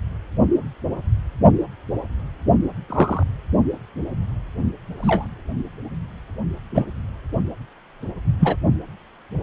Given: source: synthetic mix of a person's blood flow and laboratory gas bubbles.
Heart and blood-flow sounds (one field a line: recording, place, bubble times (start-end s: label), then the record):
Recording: Doppler ultrasound of blood flow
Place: precordium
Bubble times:
2.89-3.23 s: bubbles
4.95-5.27 s: bubbles
6.74-6.86 s: bubbles
8.40-8.55 s: bubbles
From the record:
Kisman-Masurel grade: 123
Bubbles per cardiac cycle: 1 to 2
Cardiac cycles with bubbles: 10 to 50%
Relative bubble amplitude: loud (0.450 to 0.775)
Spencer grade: 2 (many but less than half of the cardiac periods contain bubble signals, singularly or in groups)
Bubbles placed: only in the low amplitude regions of the cardiac cycle